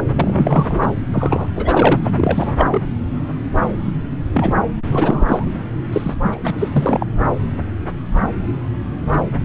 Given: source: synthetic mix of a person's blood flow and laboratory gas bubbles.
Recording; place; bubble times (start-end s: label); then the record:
Doppler ultrasound of blood flow; subclavian vein
0.00-0.03 s: bubbles
0.16-0.94 s: bubbles
1.13-1.46 s: bubbles
1.55-2.10 s: bubbles
2.16-2.54 s: bubbles
2.58-2.67 s: bubbles
2.72-2.82 s: bubbles
4.33-4.54 s: bubbles
4.89-5.46 s: bubbles
5.92-6.14 s: bubbles
6.21-6.37 s: bubbles
6.42-6.54 s: bubbles
6.58-6.68 s: bubbles
6.71-7.06 s: bubbles
From the record:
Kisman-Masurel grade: 333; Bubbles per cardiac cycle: rolling drumbeat, 9 or more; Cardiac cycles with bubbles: 50 to 99%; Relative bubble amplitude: loud (0.450 to 0.775); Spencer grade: 3 (all of the cardiac periods contain showers or single bubble signals, but not dominating or overriding the cardiac motion signals); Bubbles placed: anywhere in the cardiac cycle